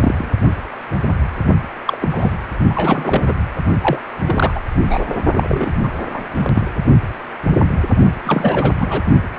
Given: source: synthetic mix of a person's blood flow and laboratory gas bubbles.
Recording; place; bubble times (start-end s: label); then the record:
Doppler ultrasound of blood flow; precordium
0.00-0.28 s: bubbles
1.85-1.98 s: bubbles
2.02-2.33 s: bubbles
2.69-3.34 s: bubbles
3.81-3.99 s: bubbles
4.25-4.61 s: bubbles
4.82-5.18 s: bubbles
5.33-5.71 s: bubbles
5.83-5.88 s: bubbles
6.13-6.23 s: bubbles
6.35-6.62 s: bubbles
8.24-8.75 s: bubbles
8.80-9.03 s: bubbles
From the record:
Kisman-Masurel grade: 232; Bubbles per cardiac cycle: several, 3 to 8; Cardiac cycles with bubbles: 50 to 99%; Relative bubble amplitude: moderate (0.250 to 0.450); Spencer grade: 3 (all of the cardiac periods contain showers or single bubble signals, but not dominating or overriding the cardiac motion signals); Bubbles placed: only in the low amplitude regions of the cardiac cycle